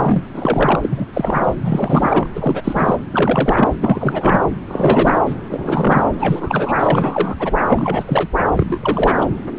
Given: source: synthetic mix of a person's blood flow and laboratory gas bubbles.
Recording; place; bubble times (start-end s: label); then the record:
Doppler ultrasound of blood flow; subclavian vein
0.00-0.23 s: bubbles
0.33-0.79 s: bubbles
0.82-1.06 s: bubbles
1.13-1.54 s: bubbles
1.59-2.28 s: bubbles
2.35-2.96 s: bubbles
3.12-3.69 s: bubbles
3.80-4.40 s: bubbles
4.67-5.21 s: bubbles
5.25-5.33 s: bubbles
5.50-6.04 s: bubbles
6.19-6.73 s: bubbles
6.79-7.35 s: bubbles
7.40-7.54 s: bubbles
7.67-8.29 s: bubbles
8.56-9.25 s: bubbles
From the record:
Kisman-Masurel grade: 343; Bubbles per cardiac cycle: rolling drumbeat, 9 or more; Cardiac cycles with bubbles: 100%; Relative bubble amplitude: loud (0.450 to 0.775); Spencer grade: 3 (all of the cardiac periods contain showers or single bubble signals, but not dominating or overriding the cardiac motion signals); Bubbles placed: anywhere in the cardiac cycle